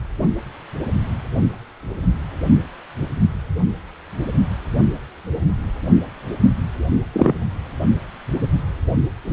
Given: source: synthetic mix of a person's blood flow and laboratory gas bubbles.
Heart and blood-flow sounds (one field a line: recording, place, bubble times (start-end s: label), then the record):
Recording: Doppler ultrasound of blood flow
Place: precordium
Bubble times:
7.13-7.33 s: bubbles
From the record:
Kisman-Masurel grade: 113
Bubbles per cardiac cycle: 1 to 2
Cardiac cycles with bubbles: 1 to 10%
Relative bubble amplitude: loud (0.450 to 0.775)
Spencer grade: 1 (occasional bubble signal discernible with the cardiac motion signal, with majority of cardiac periods free of bubbles)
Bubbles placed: anywhere in the cardiac cycle